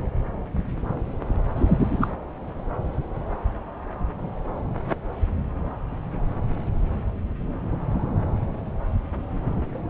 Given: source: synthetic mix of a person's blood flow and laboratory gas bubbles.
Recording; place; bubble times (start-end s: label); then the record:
Doppler ultrasound of blood flow; subclavian vein
1.55-2.15 s: bubbles
From the record:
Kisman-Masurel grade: 113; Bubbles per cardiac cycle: 1 to 2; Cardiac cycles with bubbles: 1 to 10%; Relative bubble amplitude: loud (0.450 to 0.775); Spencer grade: 1 (occasional bubble signal discernible with the cardiac motion signal, with majority of cardiac periods free of bubbles); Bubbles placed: anywhere in the cardiac cycle